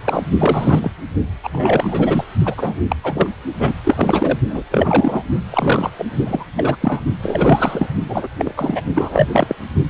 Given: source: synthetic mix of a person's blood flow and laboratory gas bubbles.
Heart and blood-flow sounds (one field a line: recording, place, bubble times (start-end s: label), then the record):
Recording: Doppler ultrasound of blood flow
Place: precordium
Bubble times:
0.05-0.23 s: bubbles
0.38-0.91 s: bubbles
1.43-1.49 s: bubbles
1.52-2.24 s: bubbles
2.45-2.54 s: bubbles
2.57-2.83 s: bubbles
2.88-2.96 s: bubbles
3.03-3.27 s: bubbles
3.58-3.74 s: bubbles
3.84-4.38 s: bubbles
4.47-4.65 s: bubbles
4.71-5.23 s: bubbles
5.51-5.91 s: bubbles
5.98-6.04 s: bubbles
6.25-6.45 s: bubbles
6.57-7.02 s: bubbles
7.22-7.87 s: bubbles
8.09-8.28 s: bubbles
8.38-8.53 s: bubbles
8.56-8.81 s: bubbles
8.94-9.29 s: bubbles
9.31-9.55 s: bubbles
From the record:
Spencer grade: 3 (all of the cardiac periods contain showers or single bubble signals, but not dominating or overriding the cardiac motion signals)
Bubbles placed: only in the low amplitude regions of the cardiac cycle